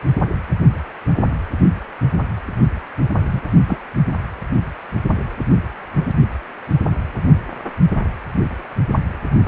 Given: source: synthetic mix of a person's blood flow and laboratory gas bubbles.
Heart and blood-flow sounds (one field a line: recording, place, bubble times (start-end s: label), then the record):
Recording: Doppler ultrasound of blood flow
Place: precordium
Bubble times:
3.33-3.42 s: bubbles
3.67-3.78 s: bubbles
From the record:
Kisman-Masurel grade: 113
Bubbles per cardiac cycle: 1 to 2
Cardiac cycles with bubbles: 1 to 10%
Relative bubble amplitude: loud (0.450 to 0.775)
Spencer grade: 1 (occasional bubble signal discernible with the cardiac motion signal, with majority of cardiac periods free of bubbles)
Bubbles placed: only in the low amplitude regions of the cardiac cycle